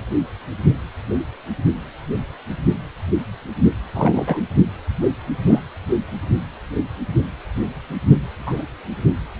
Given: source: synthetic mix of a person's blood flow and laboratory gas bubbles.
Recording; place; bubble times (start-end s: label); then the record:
Doppler ultrasound of blood flow; precordium
3.95-4.42 s: bubbles
5.46-5.59 s: bubbles
8.46-8.62 s: bubbles
From the record:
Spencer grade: 2 (many but less than half of the cardiac periods contain bubble signals, singularly or in groups); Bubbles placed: anywhere in the cardiac cycle